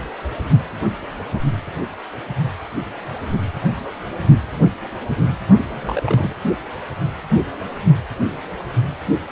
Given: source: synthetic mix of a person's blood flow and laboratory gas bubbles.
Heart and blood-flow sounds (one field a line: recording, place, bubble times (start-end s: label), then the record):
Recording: Doppler ultrasound of blood flow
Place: precordium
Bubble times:
5.69-6.33 s: bubbles
From the record:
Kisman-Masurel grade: 211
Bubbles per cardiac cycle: several, 3 to 8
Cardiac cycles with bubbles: 1 to 10%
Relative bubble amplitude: barely perceptible (0.100 to 0.250)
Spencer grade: 1 (occasional bubble signal discernible with the cardiac motion signal, with majority of cardiac periods free of bubbles)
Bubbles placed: only in the low amplitude regions of the cardiac cycle